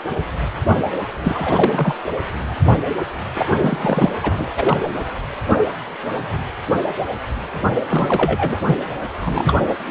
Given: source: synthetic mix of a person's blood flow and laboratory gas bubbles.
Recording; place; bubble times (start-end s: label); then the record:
Doppler ultrasound of blood flow; precordium
1.22-1.95 s: bubbles
3.35-3.46 s: bubbles
3.58-4.10 s: bubbles
4.22-4.50 s: bubbles
4.56-4.79 s: bubbles
4.81-4.91 s: bubbles
7.90-8.57 s: bubbles
8.65-8.79 s: bubbles
9.21-9.57 s: bubbles
9.68-9.74 s: bubbles
9.88-9.90 s: bubbles
From the record:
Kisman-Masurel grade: 332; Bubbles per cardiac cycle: rolling drumbeat, 9 or more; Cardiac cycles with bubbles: 50 to 99%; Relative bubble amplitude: moderate (0.250 to 0.450); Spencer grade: 3 (all of the cardiac periods contain showers or single bubble signals, but not dominating or overriding the cardiac motion signals); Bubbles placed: anywhere in the cardiac cycle